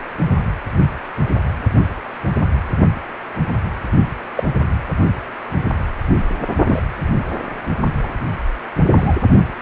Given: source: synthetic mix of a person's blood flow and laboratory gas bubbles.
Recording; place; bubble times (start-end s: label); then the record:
Doppler ultrasound of blood flow; precordium
4.36-4.43 s: bubbles
6.67-6.82 s: bubbles
8.03-8.08 s: bubbles
8.91-9.15 s: bubbles
From the record:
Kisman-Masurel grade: 122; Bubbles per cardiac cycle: 1 to 2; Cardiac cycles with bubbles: 10 to 50%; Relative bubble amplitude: moderate (0.250 to 0.450); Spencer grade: 2 (many but less than half of the cardiac periods contain bubble signals, singularly or in groups); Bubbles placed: only in the low amplitude regions of the cardiac cycle